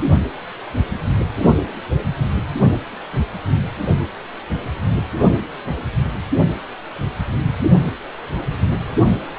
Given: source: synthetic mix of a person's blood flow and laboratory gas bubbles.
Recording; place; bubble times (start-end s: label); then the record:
Doppler ultrasound of blood flow; precordium
no bubbles
From the record:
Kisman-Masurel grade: 000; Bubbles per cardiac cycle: 0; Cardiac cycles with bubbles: 0%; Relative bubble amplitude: no bubbles discernible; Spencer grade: 0 (complete lack of bubble signals)